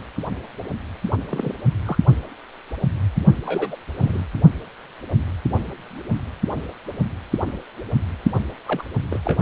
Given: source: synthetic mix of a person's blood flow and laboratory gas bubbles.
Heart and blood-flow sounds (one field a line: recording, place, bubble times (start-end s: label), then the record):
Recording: Doppler ultrasound of blood flow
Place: precordium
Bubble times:
1.29-1.55 s: bubbles
1.85-1.98 s: bubbles
3.46-3.76 s: bubbles
3.97-4.24 s: bubbles
8.68-8.82 s: bubbles
9.11-9.19 s: bubbles
9.23-9.35 s: bubbles
From the record:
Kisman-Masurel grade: 221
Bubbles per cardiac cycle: several, 3 to 8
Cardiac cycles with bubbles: 10 to 50%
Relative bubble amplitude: barely perceptible (0.100 to 0.250)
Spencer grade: 2 (many but less than half of the cardiac periods contain bubble signals, singularly or in groups)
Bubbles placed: anywhere in the cardiac cycle